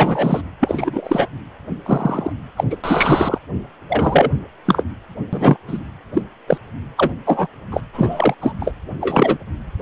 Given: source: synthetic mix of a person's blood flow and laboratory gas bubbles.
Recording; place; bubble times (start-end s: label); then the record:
Doppler ultrasound of blood flow; precordium
0.00-0.41 s: bubbles
0.60-1.28 s: bubbles
1.85-2.33 s: bubbles
2.56-2.65 s: bubbles
2.70-2.77 s: bubbles
2.83-3.38 s: bubbles
3.89-4.30 s: bubbles
4.65-4.83 s: bubbles
5.32-5.57 s: bubbles
5.67-5.79 s: bubbles
6.13-6.22 s: bubbles
6.47-6.58 s: bubbles
6.97-7.12 s: bubbles
7.26-7.47 s: bubbles
7.71-7.80 s: bubbles
7.93-8.34 s: bubbles
8.41-8.53 s: bubbles
8.60-8.73 s: bubbles
9.01-9.38 s: bubbles
From the record:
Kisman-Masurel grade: 243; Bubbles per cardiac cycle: several, 3 to 8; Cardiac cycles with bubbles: 100%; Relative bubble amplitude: loud (0.450 to 0.775); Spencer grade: 3 (all of the cardiac periods contain showers or single bubble signals, but not dominating or overriding the cardiac motion signals); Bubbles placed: anywhere in the cardiac cycle